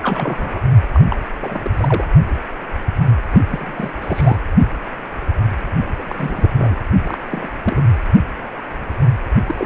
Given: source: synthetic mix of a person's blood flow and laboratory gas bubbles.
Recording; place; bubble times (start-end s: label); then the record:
Doppler ultrasound of blood flow; precordium
0.02-0.61 s: bubbles
0.93-1.00 s: bubbles
1.09-1.17 s: bubbles
1.40-1.71 s: bubbles
1.73-2.05 s: bubbles
3.33-3.41 s: bubbles
3.51-3.72 s: bubbles
3.77-3.92 s: bubbles
4.01-4.38 s: bubbles
5.97-6.76 s: bubbles
7.04-7.18 s: bubbles
7.30-7.49 s: bubbles
7.63-7.83 s: bubbles
9.46-9.66 s: bubbles
From the record:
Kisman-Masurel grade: 232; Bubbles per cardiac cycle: several, 3 to 8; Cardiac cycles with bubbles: 50 to 99%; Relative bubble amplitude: moderate (0.250 to 0.450); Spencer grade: 3 (all of the cardiac periods contain showers or single bubble signals, but not dominating or overriding the cardiac motion signals); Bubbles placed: anywhere in the cardiac cycle